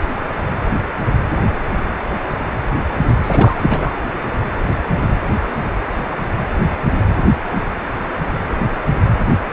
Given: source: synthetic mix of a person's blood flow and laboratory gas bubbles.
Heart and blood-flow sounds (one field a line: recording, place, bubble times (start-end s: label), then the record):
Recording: Doppler ultrasound of blood flow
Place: precordium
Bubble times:
3.23-3.92 s: bubbles
From the record:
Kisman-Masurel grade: 212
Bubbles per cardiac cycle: several, 3 to 8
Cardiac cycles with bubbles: 1 to 10%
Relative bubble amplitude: moderate (0.250 to 0.450)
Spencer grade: 1 (occasional bubble signal discernible with the cardiac motion signal, with majority of cardiac periods free of bubbles)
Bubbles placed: anywhere in the cardiac cycle